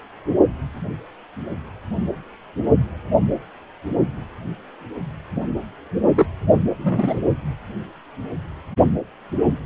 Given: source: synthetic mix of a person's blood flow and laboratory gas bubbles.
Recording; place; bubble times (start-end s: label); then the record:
Doppler ultrasound of blood flow; precordium
6.16-6.26 s: bubbles
6.48-6.53 s: bubbles
6.78-7.21 s: bubbles
From the record:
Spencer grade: 1 (occasional bubble signal discernible with the cardiac motion signal, with majority of cardiac periods free of bubbles); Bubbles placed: only in the low amplitude regions of the cardiac cycle